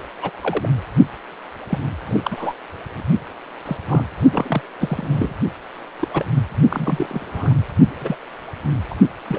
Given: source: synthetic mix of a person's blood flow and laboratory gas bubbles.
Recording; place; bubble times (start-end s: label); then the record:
Doppler ultrasound of blood flow; precordium
0.00-0.02 s: bubbles
0.22-0.30 s: bubbles
0.42-0.69 s: bubbles
1.69-1.78 s: bubbles
2.06-2.53 s: bubbles
3.66-3.77 s: bubbles
3.88-4.04 s: bubbles
4.31-4.61 s: bubbles
4.79-5.34 s: bubbles
6.00-6.08 s: bubbles
6.13-6.25 s: bubbles
6.69-7.06 s: bubbles
7.09-7.54 s: bubbles
8.00-8.16 s: bubbles
8.90-8.95 s: bubbles
9.27-9.39 s: bubbles
From the record:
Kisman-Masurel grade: 242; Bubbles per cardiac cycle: several, 3 to 8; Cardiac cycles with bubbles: 100%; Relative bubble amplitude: moderate (0.250 to 0.450); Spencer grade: 3 (all of the cardiac periods contain showers or single bubble signals, but not dominating or overriding the cardiac motion signals); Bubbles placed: only in the low amplitude regions of the cardiac cycle